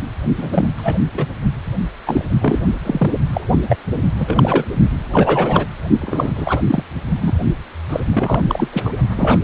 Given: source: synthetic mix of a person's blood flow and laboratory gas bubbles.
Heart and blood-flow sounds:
Doppler ultrasound of blood flow; precordium
0.38-0.68 s: bubbles
0.77-0.96 s: bubbles
1.14-1.26 s: bubbles
2.05-2.25 s: bubbles
2.41-2.60 s: bubbles
2.83-3.11 s: bubbles
3.33-3.42 s: bubbles
3.69-3.77 s: bubbles
4.20-4.64 s: bubbles
5.12-5.66 s: bubbles
6.01-6.61 s: bubbles
6.67-6.83 s: bubbles
7.21-7.34 s: bubbles
7.89-8.00 s: bubbles
8.13-8.40 s: bubbles
8.47-8.69 s: bubbles
8.73-8.89 s: bubbles
9.15-9.38 s: bubbles
From the record:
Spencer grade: 3 (all of the cardiac periods contain showers or single bubble signals, but not dominating or overriding the cardiac motion signals); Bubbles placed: only in the low amplitude regions of the cardiac cycle

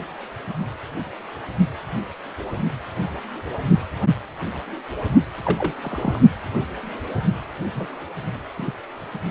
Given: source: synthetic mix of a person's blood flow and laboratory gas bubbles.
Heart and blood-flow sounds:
Doppler ultrasound of blood flow; precordium
5.44-5.73 s: bubbles
5.82-6.21 s: bubbles
7.74-7.87 s: bubbles
8.56-8.71 s: bubbles
From the record:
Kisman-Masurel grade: 122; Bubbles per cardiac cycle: 1 to 2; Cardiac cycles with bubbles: 10 to 50%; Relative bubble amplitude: moderate (0.250 to 0.450); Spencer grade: 2 (many but less than half of the cardiac periods contain bubble signals, singularly or in groups); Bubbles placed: only in the low amplitude regions of the cardiac cycle

